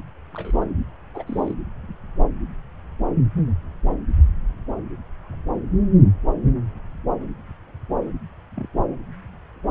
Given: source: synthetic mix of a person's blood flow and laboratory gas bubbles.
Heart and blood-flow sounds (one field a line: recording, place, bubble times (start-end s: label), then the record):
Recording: Doppler ultrasound of blood flow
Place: subclavian vein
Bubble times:
0.33-0.68 s: bubbles
1.14-1.23 s: bubbles
1.27-1.54 s: bubbles
8.56-8.67 s: bubbles
From the record:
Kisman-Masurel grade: 121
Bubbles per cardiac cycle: 1 to 2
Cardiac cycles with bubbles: 10 to 50%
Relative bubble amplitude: barely perceptible (0.100 to 0.250)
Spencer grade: 2 (many but less than half of the cardiac periods contain bubble signals, singularly or in groups)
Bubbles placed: anywhere in the cardiac cycle